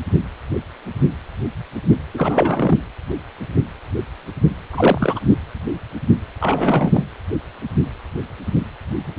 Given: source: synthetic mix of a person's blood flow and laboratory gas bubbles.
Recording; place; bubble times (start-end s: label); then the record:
Doppler ultrasound of blood flow; precordium
2.14-2.77 s: bubbles
4.72-5.20 s: bubbles
6.41-7.04 s: bubbles
From the record:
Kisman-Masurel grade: 222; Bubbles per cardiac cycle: several, 3 to 8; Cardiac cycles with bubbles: 10 to 50%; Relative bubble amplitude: moderate (0.250 to 0.450); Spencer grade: 2 (many but less than half of the cardiac periods contain bubble signals, singularly or in groups); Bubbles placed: anywhere in the cardiac cycle